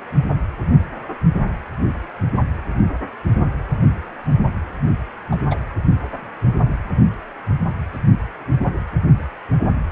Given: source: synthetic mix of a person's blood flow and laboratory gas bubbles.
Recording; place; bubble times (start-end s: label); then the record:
Doppler ultrasound of blood flow; precordium
5.31-5.37 s: bubbles
5.50-5.55 s: bubbles
From the record:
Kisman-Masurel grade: 113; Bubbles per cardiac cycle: 1 to 2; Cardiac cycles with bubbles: 1 to 10%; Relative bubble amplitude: loud (0.450 to 0.775); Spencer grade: 1 (occasional bubble signal discernible with the cardiac motion signal, with majority of cardiac periods free of bubbles); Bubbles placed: anywhere in the cardiac cycle